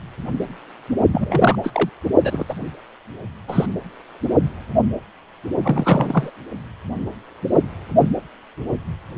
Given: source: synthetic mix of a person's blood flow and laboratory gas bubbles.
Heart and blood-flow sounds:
Doppler ultrasound of blood flow; precordium
1.12-1.58 s: bubbles
1.63-1.90 s: bubbles
2.23-2.46 s: bubbles
2.49-2.54 s: bubbles
3.48-3.66 s: bubbles
5.63-6.31 s: bubbles
From the record:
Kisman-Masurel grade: 222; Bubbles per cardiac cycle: several, 3 to 8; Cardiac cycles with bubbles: 10 to 50%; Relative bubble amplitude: moderate (0.250 to 0.450); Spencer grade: 2 (many but less than half of the cardiac periods contain bubble signals, singularly or in groups); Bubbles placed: only in the low amplitude regions of the cardiac cycle

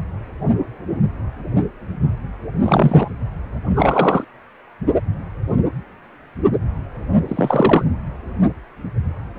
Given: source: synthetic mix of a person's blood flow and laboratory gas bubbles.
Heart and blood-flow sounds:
Doppler ultrasound of blood flow; precordium
2.64-3.11 s: bubbles
3.73-4.25 s: bubbles
7.27-7.84 s: bubbles
From the record:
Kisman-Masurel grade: 223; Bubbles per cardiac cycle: several, 3 to 8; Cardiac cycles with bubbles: 10 to 50%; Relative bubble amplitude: loud (0.450 to 0.775); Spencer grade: 2 (many but less than half of the cardiac periods contain bubble signals, singularly or in groups); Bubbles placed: anywhere in the cardiac cycle

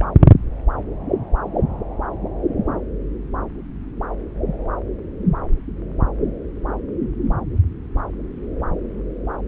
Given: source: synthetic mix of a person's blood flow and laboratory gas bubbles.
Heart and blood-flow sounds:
Doppler ultrasound of blood flow; subclavian vein
0.00-0.05 s: bubbles
From the record:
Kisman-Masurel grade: 212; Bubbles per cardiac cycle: several, 3 to 8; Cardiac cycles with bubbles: 1 to 10%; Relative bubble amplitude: moderate (0.250 to 0.450); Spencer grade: 1 (occasional bubble signal discernible with the cardiac motion signal, with majority of cardiac periods free of bubbles); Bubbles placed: anywhere in the cardiac cycle

